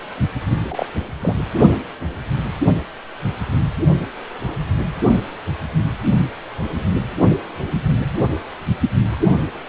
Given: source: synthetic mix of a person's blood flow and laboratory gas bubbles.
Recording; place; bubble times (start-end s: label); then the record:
Doppler ultrasound of blood flow; precordium
0.63-0.85 s: bubbles
1.20-1.38 s: bubbles
From the record:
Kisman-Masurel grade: 112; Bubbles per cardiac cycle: 1 to 2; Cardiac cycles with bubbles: 1 to 10%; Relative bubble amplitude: moderate (0.250 to 0.450); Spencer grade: 1 (occasional bubble signal discernible with the cardiac motion signal, with majority of cardiac periods free of bubbles); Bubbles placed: only in the low amplitude regions of the cardiac cycle